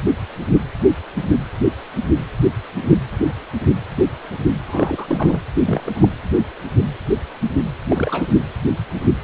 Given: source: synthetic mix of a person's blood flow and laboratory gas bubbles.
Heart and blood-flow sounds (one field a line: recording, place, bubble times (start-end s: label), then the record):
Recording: Doppler ultrasound of blood flow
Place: precordium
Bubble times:
4.67-5.40 s: bubbles
5.65-5.92 s: bubbles
6.00-6.08 s: bubbles
7.90-8.34 s: bubbles
From the record:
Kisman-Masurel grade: 222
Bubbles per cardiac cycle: several, 3 to 8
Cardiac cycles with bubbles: 10 to 50%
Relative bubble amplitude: moderate (0.250 to 0.450)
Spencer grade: 2 (many but less than half of the cardiac periods contain bubble signals, singularly or in groups)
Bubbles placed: anywhere in the cardiac cycle